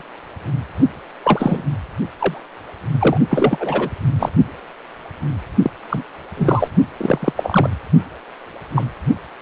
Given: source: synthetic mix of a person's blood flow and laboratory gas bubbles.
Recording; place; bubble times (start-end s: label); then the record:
Doppler ultrasound of blood flow; precordium
0.00-0.02 s: bubbles
1.23-1.62 s: bubbles
2.19-2.41 s: bubbles
2.99-3.17 s: bubbles
3.29-3.90 s: bubbles
4.19-4.29 s: bubbles
5.62-5.71 s: bubbles
5.89-6.04 s: bubbles
6.37-6.71 s: bubbles
6.97-7.32 s: bubbles
7.37-7.70 s: bubbles
8.75-8.85 s: bubbles
From the record:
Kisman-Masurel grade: 233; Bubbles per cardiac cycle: several, 3 to 8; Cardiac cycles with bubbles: 50 to 99%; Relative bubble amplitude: loud (0.450 to 0.775); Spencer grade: 3 (all of the cardiac periods contain showers or single bubble signals, but not dominating or overriding the cardiac motion signals); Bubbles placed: only in the low amplitude regions of the cardiac cycle